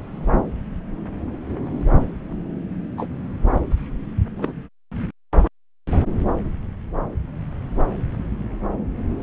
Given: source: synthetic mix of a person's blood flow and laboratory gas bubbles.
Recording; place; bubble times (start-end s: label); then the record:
Doppler ultrasound of blood flow; subclavian vein
2.97-3.06 s: bubbles
4.37-4.53 s: bubbles
From the record:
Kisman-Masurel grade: 112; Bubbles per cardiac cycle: 1 to 2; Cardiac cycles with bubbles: 1 to 10%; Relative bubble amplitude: moderate (0.250 to 0.450); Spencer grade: 1 (occasional bubble signal discernible with the cardiac motion signal, with majority of cardiac periods free of bubbles); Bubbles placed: anywhere in the cardiac cycle